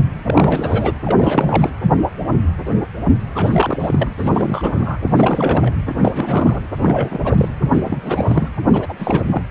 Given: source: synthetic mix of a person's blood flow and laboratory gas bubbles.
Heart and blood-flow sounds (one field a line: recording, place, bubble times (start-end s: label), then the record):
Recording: Doppler ultrasound of blood flow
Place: precordium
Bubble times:
0.00-0.04 s: bubbles
0.26-0.94 s: bubbles
1.05-1.70 s: bubbles
3.34-4.08 s: bubbles
4.18-4.98 s: bubbles
5.03-5.72 s: bubbles
5.85-6.60 s: bubbles
6.78-7.18 s: bubbles
7.25-7.49 s: bubbles
7.61-8.48 s: bubbles
8.73-8.94 s: bubbles
8.98-9.22 s: bubbles
9.28-9.43 s: bubbles
From the record:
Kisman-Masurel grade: 332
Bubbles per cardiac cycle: rolling drumbeat, 9 or more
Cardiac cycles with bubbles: 50 to 99%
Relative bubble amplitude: moderate (0.250 to 0.450)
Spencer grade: 3 (all of the cardiac periods contain showers or single bubble signals, but not dominating or overriding the cardiac motion signals)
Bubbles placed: anywhere in the cardiac cycle